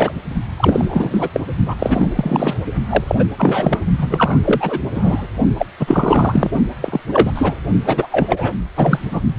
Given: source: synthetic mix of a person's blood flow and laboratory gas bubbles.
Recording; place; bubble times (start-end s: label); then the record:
Doppler ultrasound of blood flow; precordium
0.00-0.12 s: bubbles
0.56-1.29 s: bubbles
1.33-1.40 s: bubbles
1.66-1.75 s: bubbles
1.79-2.55 s: bubbles
2.90-3.04 s: bubbles
3.07-3.15 s: bubbles
3.19-3.24 s: bubbles
3.38-3.81 s: bubbles
3.98-4.41 s: bubbles
4.44-4.79 s: bubbles
4.94-5.27 s: bubbles
5.57-5.66 s: bubbles
5.79-6.51 s: bubbles
6.82-7.00 s: bubbles
7.07-7.58 s: bubbles
7.86-8.07 s: bubbles
8.12-8.53 s: bubbles
8.75-8.99 s: bubbles
9.10-9.21 s: bubbles
From the record:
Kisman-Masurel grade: 343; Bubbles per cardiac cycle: rolling drumbeat, 9 or more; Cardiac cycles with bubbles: 100%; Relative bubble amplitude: loud (0.450 to 0.775); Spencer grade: 3 (all of the cardiac periods contain showers or single bubble signals, but not dominating or overriding the cardiac motion signals); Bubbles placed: only in the low amplitude regions of the cardiac cycle